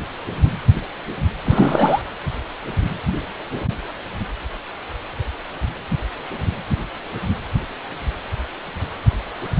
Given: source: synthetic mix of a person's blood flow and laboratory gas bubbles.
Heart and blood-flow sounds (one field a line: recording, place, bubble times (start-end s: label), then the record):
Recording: Doppler ultrasound of blood flow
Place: precordium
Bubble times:
1.45-2.02 s: bubbles
From the record:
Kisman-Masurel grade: 213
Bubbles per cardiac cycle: several, 3 to 8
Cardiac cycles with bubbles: 1 to 10%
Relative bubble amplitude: loud (0.450 to 0.775)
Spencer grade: 1 (occasional bubble signal discernible with the cardiac motion signal, with majority of cardiac periods free of bubbles)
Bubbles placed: anywhere in the cardiac cycle